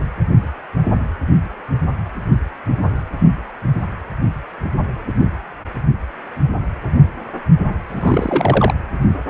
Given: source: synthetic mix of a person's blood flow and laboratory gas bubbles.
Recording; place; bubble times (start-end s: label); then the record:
Doppler ultrasound of blood flow; precordium
7.89-8.74 s: bubbles
From the record:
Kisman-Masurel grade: 212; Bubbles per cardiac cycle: several, 3 to 8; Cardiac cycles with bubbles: 1 to 10%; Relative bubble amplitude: moderate (0.250 to 0.450); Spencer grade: 1 (occasional bubble signal discernible with the cardiac motion signal, with majority of cardiac periods free of bubbles); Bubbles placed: anywhere in the cardiac cycle